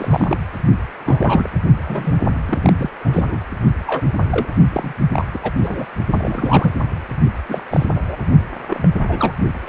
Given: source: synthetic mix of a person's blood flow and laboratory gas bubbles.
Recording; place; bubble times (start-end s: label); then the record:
Doppler ultrasound of blood flow; precordium
0.00-0.38 s: bubbles
1.05-1.50 s: bubbles
1.84-2.14 s: bubbles
2.48-2.73 s: bubbles
2.77-2.90 s: bubbles
3.00-3.39 s: bubbles
3.87-4.02 s: bubbles
4.31-4.47 s: bubbles
4.72-4.93 s: bubbles
5.12-5.25 s: bubbles
5.33-5.39 s: bubbles
5.42-5.52 s: bubbles
5.62-5.86 s: bubbles
6.10-6.72 s: bubbles
7.48-7.63 s: bubbles
7.71-7.86 s: bubbles
7.95-8.16 s: bubbles
8.70-8.88 s: bubbles
9.08-9.34 s: bubbles
9.66-9.69 s: bubbles
From the record:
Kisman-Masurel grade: 242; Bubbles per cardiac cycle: several, 3 to 8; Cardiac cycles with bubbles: 100%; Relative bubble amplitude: moderate (0.250 to 0.450); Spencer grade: 3 (all of the cardiac periods contain showers or single bubble signals, but not dominating or overriding the cardiac motion signals); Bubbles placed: only in the low amplitude regions of the cardiac cycle